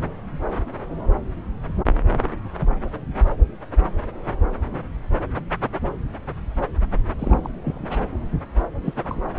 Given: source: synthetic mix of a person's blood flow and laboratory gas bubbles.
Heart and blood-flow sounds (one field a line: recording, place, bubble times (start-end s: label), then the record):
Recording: Doppler ultrasound of blood flow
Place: subclavian vein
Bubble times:
7.18-7.51 s: bubbles
7.63-7.99 s: bubbles
8.84-9.20 s: bubbles
From the record:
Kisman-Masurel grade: 211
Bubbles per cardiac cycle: several, 3 to 8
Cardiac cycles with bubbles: 1 to 10%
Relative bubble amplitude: barely perceptible (0.100 to 0.250)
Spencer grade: 1 (occasional bubble signal discernible with the cardiac motion signal, with majority of cardiac periods free of bubbles)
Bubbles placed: anywhere in the cardiac cycle